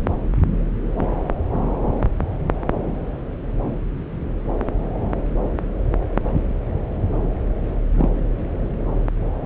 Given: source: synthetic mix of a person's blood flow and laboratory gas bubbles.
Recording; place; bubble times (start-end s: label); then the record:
Doppler ultrasound of blood flow; subclavian vein
7.92-8.09 s: bubbles
From the record:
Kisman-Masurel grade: 122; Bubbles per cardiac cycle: 1 to 2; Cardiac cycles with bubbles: 10 to 50%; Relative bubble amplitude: moderate (0.250 to 0.450); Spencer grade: 2 (many but less than half of the cardiac periods contain bubble signals, singularly or in groups); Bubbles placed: anywhere in the cardiac cycle